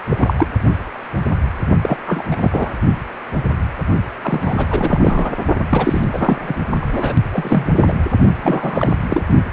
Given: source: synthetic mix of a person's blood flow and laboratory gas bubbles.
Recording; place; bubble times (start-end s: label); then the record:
Doppler ultrasound of blood flow; precordium
0.09-0.34 s: bubbles
0.36-0.47 s: bubbles
1.81-1.97 s: bubbles
2.06-2.24 s: bubbles
2.31-2.74 s: bubbles
4.21-5.30 s: bubbles
5.69-6.04 s: bubbles
6.12-6.37 s: bubbles
6.41-6.54 s: bubbles
6.81-6.86 s: bubbles
6.91-7.13 s: bubbles
7.32-7.71 s: bubbles
7.75-7.93 s: bubbles
8.42-8.93 s: bubbles
9.09-9.24 s: bubbles
From the record:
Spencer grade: 3 (all of the cardiac periods contain showers or single bubble signals, but not dominating or overriding the cardiac motion signals); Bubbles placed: only in the low amplitude regions of the cardiac cycle